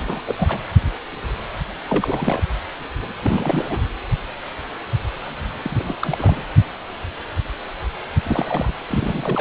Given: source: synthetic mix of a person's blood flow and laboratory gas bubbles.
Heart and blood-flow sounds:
Doppler ultrasound of blood flow; precordium
0.07-0.21 s: bubbles
0.27-0.35 s: bubbles
0.38-0.58 s: bubbles
1.89-2.41 s: bubbles
3.22-3.81 s: bubbles
5.63-5.83 s: bubbles
5.86-5.95 s: bubbles
6.00-6.42 s: bubbles
8.24-8.75 s: bubbles
8.87-9.41 s: bubbles
From the record:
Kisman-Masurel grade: 332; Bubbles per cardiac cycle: rolling drumbeat, 9 or more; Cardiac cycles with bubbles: 50 to 99%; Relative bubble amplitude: moderate (0.250 to 0.450); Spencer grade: 3 (all of the cardiac periods contain showers or single bubble signals, but not dominating or overriding the cardiac motion signals); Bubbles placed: anywhere in the cardiac cycle

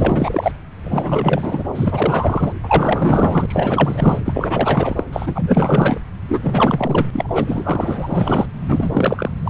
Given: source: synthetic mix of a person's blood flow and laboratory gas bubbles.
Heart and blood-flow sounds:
Doppler ultrasound of blood flow; subclavian vein
0.00-0.52 s: bubbles
0.84-1.65 s: bubbles
1.75-2.52 s: bubbles
2.63-4.21 s: bubbles
4.25-5.04 s: bubbles
5.12-5.98 s: bubbles
6.28-7.06 s: bubbles
7.12-7.44 s: bubbles
7.47-8.46 s: bubbles
8.68-9.31 s: bubbles
9.43-9.50 s: bubbles
From the record:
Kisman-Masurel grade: 444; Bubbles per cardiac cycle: continuous sound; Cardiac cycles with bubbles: 100%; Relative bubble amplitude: maximal (0.775 to 0.999); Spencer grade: 4 (maximum detectable bubble signal sounding continuously throughout systole and diastole of every cardiac period, and overriding the amplitude of the normal cardiac signals); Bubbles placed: anywhere in the cardiac cycle

